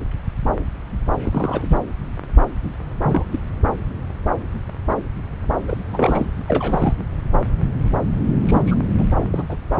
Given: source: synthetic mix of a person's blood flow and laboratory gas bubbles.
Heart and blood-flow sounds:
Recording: Doppler ultrasound of blood flow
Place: subclavian vein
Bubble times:
1.22-1.77 s: bubbles
3.03-3.26 s: bubbles
3.32-3.39 s: bubbles
5.67-5.78 s: bubbles
5.85-6.25 s: bubbles
6.48-6.93 s: bubbles
8.46-8.61 s: bubbles
8.67-8.76 s: bubbles
8.97-9.14 s: bubbles
9.21-9.25 s: bubbles
9.31-9.43 s: bubbles
9.49-9.56 s: bubbles
From the record:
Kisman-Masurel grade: 222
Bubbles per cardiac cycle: several, 3 to 8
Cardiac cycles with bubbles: 10 to 50%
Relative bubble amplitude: moderate (0.250 to 0.450)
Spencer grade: 2 (many but less than half of the cardiac periods contain bubble signals, singularly or in groups)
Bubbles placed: anywhere in the cardiac cycle

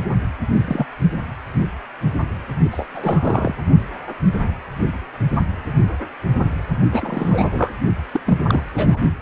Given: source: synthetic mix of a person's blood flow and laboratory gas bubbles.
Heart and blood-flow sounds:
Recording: Doppler ultrasound of blood flow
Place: precordium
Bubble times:
0.54-0.86 s: bubbles
2.71-2.86 s: bubbles
2.94-3.55 s: bubbles
6.92-7.74 s: bubbles
8.13-8.21 s: bubbles
8.26-8.62 s: bubbles
8.75-8.99 s: bubbles
From the record:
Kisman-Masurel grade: 232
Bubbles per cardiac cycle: several, 3 to 8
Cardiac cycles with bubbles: 50 to 99%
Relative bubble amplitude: moderate (0.250 to 0.450)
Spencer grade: 3 (all of the cardiac periods contain showers or single bubble signals, but not dominating or overriding the cardiac motion signals)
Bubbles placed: only in the low amplitude regions of the cardiac cycle

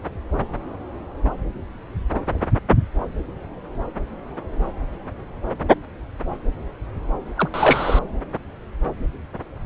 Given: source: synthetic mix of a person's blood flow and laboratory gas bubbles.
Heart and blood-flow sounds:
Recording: Doppler ultrasound of blood flow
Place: subclavian vein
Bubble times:
7.35-7.49 s: bubbles
7.54-7.99 s: bubbles
From the record:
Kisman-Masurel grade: 213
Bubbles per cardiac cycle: several, 3 to 8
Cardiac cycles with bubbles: 1 to 10%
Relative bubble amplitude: loud (0.450 to 0.775)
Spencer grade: 1 (occasional bubble signal discernible with the cardiac motion signal, with majority of cardiac periods free of bubbles)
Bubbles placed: anywhere in the cardiac cycle

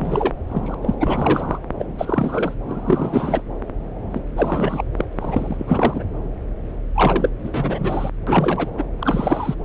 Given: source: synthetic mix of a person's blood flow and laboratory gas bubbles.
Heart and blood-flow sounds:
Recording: Doppler ultrasound of blood flow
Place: subclavian vein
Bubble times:
0.00-0.34 s: bubbles
0.48-0.74 s: bubbles
0.82-0.94 s: bubbles
0.99-1.58 s: bubbles
1.79-1.85 s: bubbles
1.98-2.54 s: bubbles
2.67-3.42 s: bubbles
4.11-4.20 s: bubbles
4.36-4.83 s: bubbles
4.96-5.04 s: bubbles
5.11-5.13 s: bubbles
5.17-6.04 s: bubbles
6.95-7.29 s: bubbles
7.43-8.10 s: bubbles
8.26-8.70 s: bubbles
8.77-8.83 s: bubbles
9.01-9.54 s: bubbles
From the record:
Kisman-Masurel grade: 342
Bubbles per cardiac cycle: rolling drumbeat, 9 or more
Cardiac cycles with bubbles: 100%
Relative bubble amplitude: moderate (0.250 to 0.450)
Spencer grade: 3 (all of the cardiac periods contain showers or single bubble signals, but not dominating or overriding the cardiac motion signals)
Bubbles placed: anywhere in the cardiac cycle

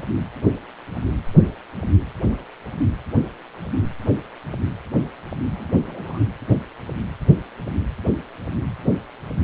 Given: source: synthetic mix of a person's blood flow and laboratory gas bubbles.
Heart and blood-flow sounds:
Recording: Doppler ultrasound of blood flow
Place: precordium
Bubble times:
5.50-5.68 s: bubbles
5.85-6.20 s: bubbles
From the record:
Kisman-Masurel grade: 211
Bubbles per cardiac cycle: several, 3 to 8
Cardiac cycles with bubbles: 1 to 10%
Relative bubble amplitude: barely perceptible (0.100 to 0.250)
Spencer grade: 1 (occasional bubble signal discernible with the cardiac motion signal, with majority of cardiac periods free of bubbles)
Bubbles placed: anywhere in the cardiac cycle

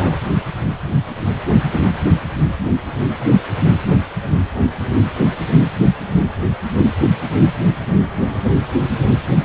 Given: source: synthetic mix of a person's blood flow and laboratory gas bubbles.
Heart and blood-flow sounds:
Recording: Doppler ultrasound of blood flow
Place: precordium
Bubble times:
0.00-0.18 s: bubbles
From the record:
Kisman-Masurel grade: 112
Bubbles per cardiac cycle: 1 to 2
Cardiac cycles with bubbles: 1 to 10%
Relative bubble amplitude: moderate (0.250 to 0.450)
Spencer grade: 1 (occasional bubble signal discernible with the cardiac motion signal, with majority of cardiac periods free of bubbles)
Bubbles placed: anywhere in the cardiac cycle

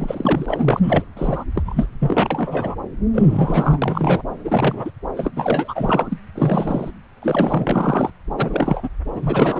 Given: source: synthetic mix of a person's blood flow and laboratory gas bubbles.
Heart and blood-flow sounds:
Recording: Doppler ultrasound of blood flow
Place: subclavian vein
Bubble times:
0.00-0.79 s: bubbles
0.82-1.04 s: bubbles
1.17-1.45 s: bubbles
1.55-1.86 s: bubbles
1.99-2.75 s: bubbles
3.13-3.78 s: bubbles
3.82-4.23 s: bubbles
4.44-4.91 s: bubbles
5.17-5.33 s: bubbles
5.36-6.17 s: bubbles
6.35-6.91 s: bubbles
7.22-8.10 s: bubbles
8.37-8.89 s: bubbles
9.12-9.60 s: bubbles
From the record:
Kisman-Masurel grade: 333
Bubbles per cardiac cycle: rolling drumbeat, 9 or more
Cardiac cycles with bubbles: 50 to 99%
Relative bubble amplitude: loud (0.450 to 0.775)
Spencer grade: 3 (all of the cardiac periods contain showers or single bubble signals, but not dominating or overriding the cardiac motion signals)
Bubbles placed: anywhere in the cardiac cycle

